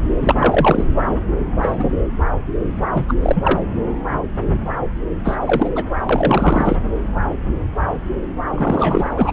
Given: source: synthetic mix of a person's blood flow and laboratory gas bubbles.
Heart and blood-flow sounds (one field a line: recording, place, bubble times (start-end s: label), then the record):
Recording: Doppler ultrasound of blood flow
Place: subclavian vein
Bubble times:
0.21-0.84 s: bubbles
1.37-1.85 s: bubbles
2.94-3.06 s: bubbles
3.08-3.14 s: bubbles
3.22-3.60 s: bubbles
5.24-5.38 s: bubbles
5.45-5.71 s: bubbles
5.75-5.84 s: bubbles
6.09-6.77 s: bubbles
8.51-9.31 s: bubbles
From the record:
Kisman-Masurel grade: 233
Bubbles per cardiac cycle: several, 3 to 8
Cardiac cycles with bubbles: 50 to 99%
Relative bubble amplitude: loud (0.450 to 0.775)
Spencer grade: 3 (all of the cardiac periods contain showers or single bubble signals, but not dominating or overriding the cardiac motion signals)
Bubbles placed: anywhere in the cardiac cycle